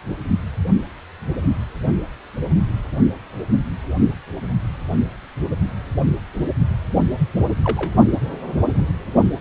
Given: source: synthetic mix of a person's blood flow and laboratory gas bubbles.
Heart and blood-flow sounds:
Doppler ultrasound of blood flow; precordium
7.64-7.92 s: bubbles
From the record:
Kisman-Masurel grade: 112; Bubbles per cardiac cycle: 1 to 2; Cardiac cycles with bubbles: 1 to 10%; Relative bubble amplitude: moderate (0.250 to 0.450); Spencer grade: 1 (occasional bubble signal discernible with the cardiac motion signal, with majority of cardiac periods free of bubbles); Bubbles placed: only in the low amplitude regions of the cardiac cycle

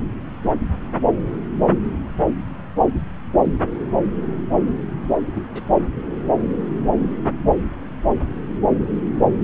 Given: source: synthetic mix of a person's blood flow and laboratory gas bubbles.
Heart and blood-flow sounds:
Doppler ultrasound of blood flow; subclavian vein
5.35-5.47 s: bubbles
5.50-5.62 s: bubbles
From the record:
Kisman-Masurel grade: 121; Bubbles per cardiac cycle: 1 to 2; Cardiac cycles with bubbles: 10 to 50%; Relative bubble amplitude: barely perceptible (0.100 to 0.250); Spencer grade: 2 (many but less than half of the cardiac periods contain bubble signals, singularly or in groups); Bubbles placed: anywhere in the cardiac cycle

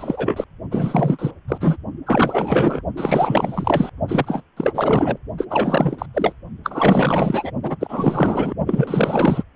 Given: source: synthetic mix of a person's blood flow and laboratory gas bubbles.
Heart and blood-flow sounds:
Doppler ultrasound of blood flow; precordium
0.00-0.44 s: bubbles
0.71-1.31 s: bubbles
1.48-1.58 s: bubbles
1.60-1.77 s: bubbles
2.06-2.81 s: bubbles
2.96-3.90 s: bubbles
4.08-4.42 s: bubbles
4.56-5.18 s: bubbles
5.37-5.45 s: bubbles
5.49-6.06 s: bubbles
6.13-6.35 s: bubbles
6.63-7.51 s: bubbles
7.62-7.77 s: bubbles
7.80-8.54 s: bubbles
8.66-9.44 s: bubbles
From the record:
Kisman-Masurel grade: 444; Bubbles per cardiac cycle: continuous sound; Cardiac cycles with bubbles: 100%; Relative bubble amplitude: maximal (0.775 to 0.999); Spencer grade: 4 (maximum detectable bubble signal sounding continuously throughout systole and diastole of every cardiac period, and overriding the amplitude of the normal cardiac signals); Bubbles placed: only in the low amplitude regions of the cardiac cycle

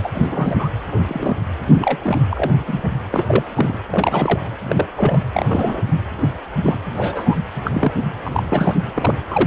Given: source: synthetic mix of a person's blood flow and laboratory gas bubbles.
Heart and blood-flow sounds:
Doppler ultrasound of blood flow; precordium
0.03-0.10 s: bubbles
0.14-0.69 s: bubbles
0.90-0.98 s: bubbles
1.08-1.36 s: bubbles
1.67-1.98 s: bubbles
2.02-2.21 s: bubbles
2.30-2.50 s: bubbles
2.67-2.83 s: bubbles
3.11-3.44 s: bubbles
3.55-3.78 s: bubbles
3.90-4.40 s: bubbles
4.68-4.87 s: bubbles
4.95-5.22 s: bubbles
5.33-5.83 s: bubbles
6.20-6.29 s: bubbles
6.63-6.77 s: bubbles
6.95-7.35 s: bubbles
7.64-7.92 s: bubbles
8.24-8.42 s: bubbles
8.48-8.81 s: bubbles
8.94-9.15 s: bubbles
9.29-9.47 s: bubbles
From the record:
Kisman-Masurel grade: 242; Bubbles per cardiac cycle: several, 3 to 8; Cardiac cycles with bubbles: 100%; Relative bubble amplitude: moderate (0.250 to 0.450); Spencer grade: 3 (all of the cardiac periods contain showers or single bubble signals, but not dominating or overriding the cardiac motion signals); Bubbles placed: anywhere in the cardiac cycle

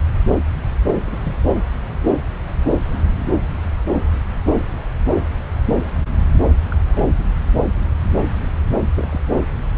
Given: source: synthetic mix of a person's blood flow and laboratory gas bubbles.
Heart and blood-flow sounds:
Doppler ultrasound of blood flow; subclavian vein
1.04-1.19 s: bubbles
1.24-1.35 s: bubbles
6.69-6.77 s: bubbles
8.95-9.20 s: bubbles
From the record:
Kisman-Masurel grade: 121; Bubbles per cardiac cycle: 1 to 2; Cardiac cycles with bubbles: 10 to 50%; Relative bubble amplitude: barely perceptible (0.100 to 0.250); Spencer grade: 2 (many but less than half of the cardiac periods contain bubble signals, singularly or in groups); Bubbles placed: anywhere in the cardiac cycle

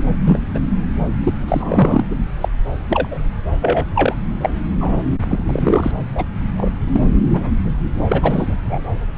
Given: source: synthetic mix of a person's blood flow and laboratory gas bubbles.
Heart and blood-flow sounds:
Doppler ultrasound of blood flow; subclavian vein
0.25-0.39 s: bubbles
0.54-0.58 s: bubbles
1.23-1.34 s: bubbles
1.48-2.05 s: bubbles
2.10-2.15 s: bubbles
2.41-2.48 s: bubbles
2.89-3.08 s: bubbles
3.11-3.19 s: bubbles
3.61-3.85 s: bubbles
3.94-4.14 s: bubbles
4.41-4.49 s: bubbles
4.80-5.03 s: bubbles
5.29-5.92 s: bubbles
6.14-6.25 s: bubbles
6.56-6.71 s: bubbles
6.88-7.00 s: bubbles
7.33-7.50 s: bubbles
7.63-7.74 s: bubbles
8.08-8.55 s: bubbles
8.65-8.79 s: bubbles
From the record:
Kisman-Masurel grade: 243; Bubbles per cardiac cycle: several, 3 to 8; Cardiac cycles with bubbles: 100%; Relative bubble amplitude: loud (0.450 to 0.775); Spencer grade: 3 (all of the cardiac periods contain showers or single bubble signals, but not dominating or overriding the cardiac motion signals); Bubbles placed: anywhere in the cardiac cycle

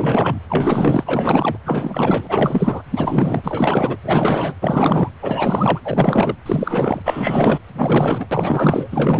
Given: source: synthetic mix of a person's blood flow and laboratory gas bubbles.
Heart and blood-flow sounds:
Doppler ultrasound of blood flow; precordium
0.00-0.39 s: bubbles
0.49-1.58 s: bubbles
1.66-2.83 s: bubbles
2.91-3.97 s: bubbles
4.02-4.54 s: bubbles
4.61-5.09 s: bubbles
5.21-5.80 s: bubbles
5.83-6.35 s: bubbles
6.45-7.58 s: bubbles
7.74-8.27 s: bubbles
8.31-8.88 s: bubbles
8.92-9.20 s: bubbles
From the record:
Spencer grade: 4 (maximum detectable bubble signal sounding continuously throughout systole and diastole of every cardiac period, and overriding the amplitude of the normal cardiac signals); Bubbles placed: anywhere in the cardiac cycle

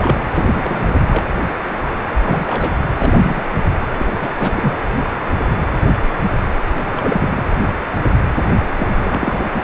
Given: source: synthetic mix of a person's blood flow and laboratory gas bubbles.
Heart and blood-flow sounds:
Doppler ultrasound of blood flow; precordium
0.00-0.16 s: bubbles
0.34-0.95 s: bubbles
1.09-1.25 s: bubbles
2.25-2.83 s: bubbles
2.98-3.44 s: bubbles
3.97-4.06 s: bubbles
4.21-4.29 s: bubbles
4.39-4.77 s: bubbles
6.76-7.43 s: bubbles
8.77-8.87 s: bubbles
8.98-9.44 s: bubbles
9.53-9.64 s: bubbles
From the record:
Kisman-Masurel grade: 222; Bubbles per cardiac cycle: several, 3 to 8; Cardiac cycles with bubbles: 10 to 50%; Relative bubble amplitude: moderate (0.250 to 0.450); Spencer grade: 2 (many but less than half of the cardiac periods contain bubble signals, singularly or in groups); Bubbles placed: anywhere in the cardiac cycle

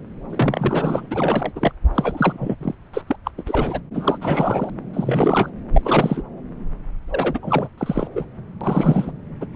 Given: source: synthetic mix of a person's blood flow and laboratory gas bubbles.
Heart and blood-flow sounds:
Doppler ultrasound of blood flow; subclavian vein
0.29-1.06 s: bubbles
1.10-1.52 s: bubbles
1.56-1.71 s: bubbles
1.95-2.56 s: bubbles
2.60-2.75 s: bubbles
2.93-3.02 s: bubbles
3.06-3.16 s: bubbles
3.25-3.31 s: bubbles
3.37-3.43 s: bubbles
3.47-3.80 s: bubbles
3.94-4.19 s: bubbles
4.21-4.70 s: bubbles
4.93-5.50 s: bubbles
5.73-6.23 s: bubbles
7.11-7.69 s: bubbles
7.78-8.08 s: bubbles
8.15-8.25 s: bubbles
8.60-9.11 s: bubbles
9.40-9.46 s: bubbles
9.53-9.56 s: bubbles
From the record:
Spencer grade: 3 (all of the cardiac periods contain showers or single bubble signals, but not dominating or overriding the cardiac motion signals); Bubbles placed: anywhere in the cardiac cycle

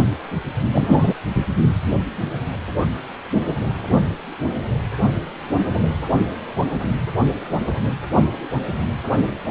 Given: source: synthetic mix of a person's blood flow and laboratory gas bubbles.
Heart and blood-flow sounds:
Doppler ultrasound of blood flow; precordium
0.72-1.14 s: bubbles
From the record:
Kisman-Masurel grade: 113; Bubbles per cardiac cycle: 1 to 2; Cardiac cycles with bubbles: 1 to 10%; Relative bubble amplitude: loud (0.450 to 0.775); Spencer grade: 1 (occasional bubble signal discernible with the cardiac motion signal, with majority of cardiac periods free of bubbles); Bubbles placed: anywhere in the cardiac cycle

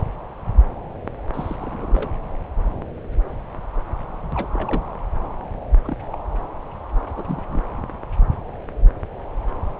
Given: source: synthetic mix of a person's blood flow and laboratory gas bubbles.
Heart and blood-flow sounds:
Doppler ultrasound of blood flow; subclavian vein
1.33-1.56 s: bubbles
1.60-2.10 s: bubbles
4.34-4.49 s: bubbles
4.54-4.82 s: bubbles
5.84-5.96 s: bubbles
6.11-6.18 s: bubbles
7.17-7.24 s: bubbles
7.27-7.43 s: bubbles
7.48-7.64 s: bubbles
From the record:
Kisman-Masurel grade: 221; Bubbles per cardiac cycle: several, 3 to 8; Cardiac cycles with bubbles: 10 to 50%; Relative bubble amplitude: barely perceptible (0.100 to 0.250); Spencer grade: 2 (many but less than half of the cardiac periods contain bubble signals, singularly or in groups); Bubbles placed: anywhere in the cardiac cycle

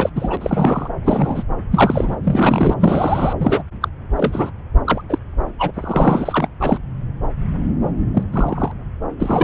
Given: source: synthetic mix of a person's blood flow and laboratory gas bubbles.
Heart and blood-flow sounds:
Doppler ultrasound of blood flow; subclavian vein
0.00-0.09 s: bubbles
0.15-0.89 s: bubbles
1.04-1.43 s: bubbles
1.71-2.16 s: bubbles
2.23-2.74 s: bubbles
2.79-3.33 s: bubbles
3.39-3.63 s: bubbles
3.81-3.88 s: bubbles
4.16-4.50 s: bubbles
4.84-5.01 s: bubbles
5.09-5.18 s: bubbles
5.58-6.48 s: bubbles
6.59-6.78 s: bubbles
8.14-8.23 s: bubbles
8.32-8.71 s: bubbles
9.19-9.44 s: bubbles
From the record:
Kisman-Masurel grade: 233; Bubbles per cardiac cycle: several, 3 to 8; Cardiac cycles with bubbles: 50 to 99%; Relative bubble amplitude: loud (0.450 to 0.775); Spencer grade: 3 (all of the cardiac periods contain showers or single bubble signals, but not dominating or overriding the cardiac motion signals); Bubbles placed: anywhere in the cardiac cycle

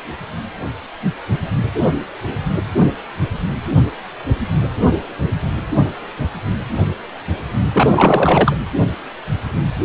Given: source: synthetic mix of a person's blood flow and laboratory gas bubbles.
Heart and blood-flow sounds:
Doppler ultrasound of blood flow; precordium
7.72-8.55 s: bubbles
From the record:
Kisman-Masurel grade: 213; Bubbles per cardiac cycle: several, 3 to 8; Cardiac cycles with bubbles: 1 to 10%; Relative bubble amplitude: loud (0.450 to 0.775); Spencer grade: 1 (occasional bubble signal discernible with the cardiac motion signal, with majority of cardiac periods free of bubbles); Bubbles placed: anywhere in the cardiac cycle

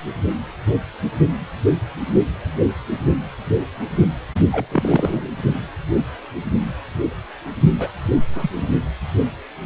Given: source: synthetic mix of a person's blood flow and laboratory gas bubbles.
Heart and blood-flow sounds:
Doppler ultrasound of blood flow; precordium
4.51-4.67 s: bubbles
4.71-5.29 s: bubbles
7.79-7.88 s: bubbles
8.35-8.50 s: bubbles
8.57-8.70 s: bubbles
From the record:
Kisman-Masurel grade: 222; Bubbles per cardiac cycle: several, 3 to 8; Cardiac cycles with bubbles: 10 to 50%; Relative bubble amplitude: moderate (0.250 to 0.450); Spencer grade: 2 (many but less than half of the cardiac periods contain bubble signals, singularly or in groups); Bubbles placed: only in the low amplitude regions of the cardiac cycle

